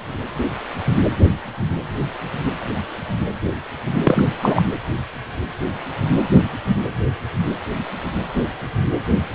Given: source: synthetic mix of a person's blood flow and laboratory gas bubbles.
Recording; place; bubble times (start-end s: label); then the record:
Doppler ultrasound of blood flow; precordium
4.04-4.27 s: bubbles
4.42-4.62 s: bubbles
From the record:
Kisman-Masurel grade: 213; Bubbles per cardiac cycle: several, 3 to 8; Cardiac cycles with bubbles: 1 to 10%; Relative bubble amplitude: loud (0.450 to 0.775); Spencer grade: 1 (occasional bubble signal discernible with the cardiac motion signal, with majority of cardiac periods free of bubbles); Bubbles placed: anywhere in the cardiac cycle